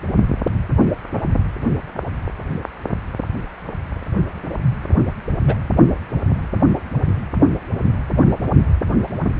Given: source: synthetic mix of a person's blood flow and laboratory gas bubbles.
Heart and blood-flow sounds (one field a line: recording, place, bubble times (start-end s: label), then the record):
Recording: Doppler ultrasound of blood flow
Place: precordium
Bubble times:
5.47-5.54 s: bubbles
From the record:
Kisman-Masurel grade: 112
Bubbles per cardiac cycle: 1 to 2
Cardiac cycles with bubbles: 1 to 10%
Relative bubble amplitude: moderate (0.250 to 0.450)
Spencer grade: 1 (occasional bubble signal discernible with the cardiac motion signal, with majority of cardiac periods free of bubbles)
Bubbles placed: anywhere in the cardiac cycle